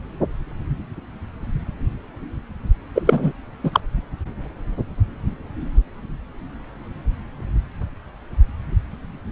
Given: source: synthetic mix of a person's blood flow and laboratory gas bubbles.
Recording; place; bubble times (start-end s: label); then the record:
Doppler ultrasound of blood flow; subclavian vein
2.95-3.02 s: bubbles
3.06-3.33 s: bubbles
3.64-3.80 s: bubbles
From the record:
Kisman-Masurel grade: 213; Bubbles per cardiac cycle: several, 3 to 8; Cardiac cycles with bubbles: 1 to 10%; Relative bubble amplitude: loud (0.450 to 0.775); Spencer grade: 1 (occasional bubble signal discernible with the cardiac motion signal, with majority of cardiac periods free of bubbles); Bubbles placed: anywhere in the cardiac cycle